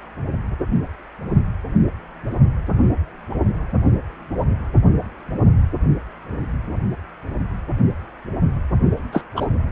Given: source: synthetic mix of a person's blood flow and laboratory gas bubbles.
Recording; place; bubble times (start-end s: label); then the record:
Doppler ultrasound of blood flow; precordium
9.12-9.22 s: bubbles
9.36-9.46 s: bubbles
From the record:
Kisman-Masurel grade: 113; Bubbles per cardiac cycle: 1 to 2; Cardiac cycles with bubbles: 1 to 10%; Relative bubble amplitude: loud (0.450 to 0.775); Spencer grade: 1 (occasional bubble signal discernible with the cardiac motion signal, with majority of cardiac periods free of bubbles); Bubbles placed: only in the low amplitude regions of the cardiac cycle